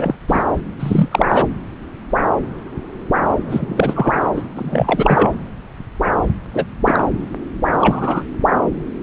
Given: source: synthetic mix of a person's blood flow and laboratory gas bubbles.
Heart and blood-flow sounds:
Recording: Doppler ultrasound of blood flow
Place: subclavian vein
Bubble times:
0.00-0.15 s: bubbles
0.28-0.44 s: bubbles
0.79-1.08 s: bubbles
1.11-1.47 s: bubbles
3.48-4.12 s: bubbles
4.36-4.43 s: bubbles
4.56-5.29 s: bubbles
6.54-6.66 s: bubbles
6.85-7.03 s: bubbles
7.72-8.24 s: bubbles
From the record:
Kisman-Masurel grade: 233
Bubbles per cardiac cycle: several, 3 to 8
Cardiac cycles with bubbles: 50 to 99%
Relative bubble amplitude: loud (0.450 to 0.775)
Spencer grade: 3 (all of the cardiac periods contain showers or single bubble signals, but not dominating or overriding the cardiac motion signals)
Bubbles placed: anywhere in the cardiac cycle

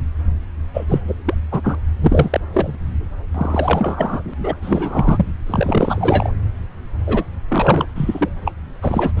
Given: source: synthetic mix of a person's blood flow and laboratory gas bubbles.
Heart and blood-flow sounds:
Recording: Doppler ultrasound of blood flow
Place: subclavian vein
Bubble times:
0.73-0.86 s: bubbles
0.89-1.01 s: bubbles
1.07-1.15 s: bubbles
1.25-1.34 s: bubbles
1.51-1.75 s: bubbles
2.02-2.41 s: bubbles
2.52-2.75 s: bubbles
3.34-4.22 s: bubbles
4.27-4.33 s: bubbles
4.43-4.54 s: bubbles
4.61-5.26 s: bubbles
5.46-6.33 s: bubbles
7.06-7.24 s: bubbles
7.48-7.85 s: bubbles
7.95-8.29 s: bubbles
8.45-8.53 s: bubbles
8.82-9.12 s: bubbles
9.17-9.20 s: bubbles
From the record:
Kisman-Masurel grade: 343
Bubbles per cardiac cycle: rolling drumbeat, 9 or more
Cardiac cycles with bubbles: 100%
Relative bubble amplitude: loud (0.450 to 0.775)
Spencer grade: 3 (all of the cardiac periods contain showers or single bubble signals, but not dominating or overriding the cardiac motion signals)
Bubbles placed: anywhere in the cardiac cycle

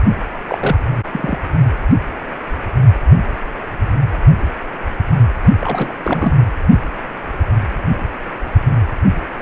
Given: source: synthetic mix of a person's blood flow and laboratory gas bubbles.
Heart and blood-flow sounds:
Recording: Doppler ultrasound of blood flow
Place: precordium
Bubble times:
0.47-0.78 s: bubbles
1.12-1.38 s: bubbles
5.58-5.95 s: bubbles
6.03-6.39 s: bubbles
From the record:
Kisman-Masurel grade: 222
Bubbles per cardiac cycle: several, 3 to 8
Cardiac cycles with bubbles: 10 to 50%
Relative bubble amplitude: moderate (0.250 to 0.450)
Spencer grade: 2 (many but less than half of the cardiac periods contain bubble signals, singularly or in groups)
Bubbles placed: only in the low amplitude regions of the cardiac cycle

